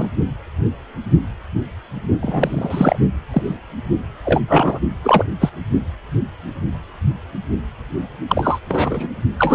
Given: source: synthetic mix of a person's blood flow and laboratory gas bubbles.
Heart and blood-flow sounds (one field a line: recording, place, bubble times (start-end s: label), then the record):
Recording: Doppler ultrasound of blood flow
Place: precordium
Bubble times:
0.00-0.09 s: bubbles
2.21-2.98 s: bubbles
3.31-3.57 s: bubbles
4.25-4.40 s: bubbles
4.48-4.79 s: bubbles
5.03-5.24 s: bubbles
5.40-5.49 s: bubbles
8.28-8.59 s: bubbles
8.68-9.08 s: bubbles
9.38-9.55 s: bubbles
From the record:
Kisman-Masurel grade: 233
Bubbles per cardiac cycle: several, 3 to 8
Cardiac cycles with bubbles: 50 to 99%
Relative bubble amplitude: loud (0.450 to 0.775)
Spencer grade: 3 (all of the cardiac periods contain showers or single bubble signals, but not dominating or overriding the cardiac motion signals)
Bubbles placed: only in the low amplitude regions of the cardiac cycle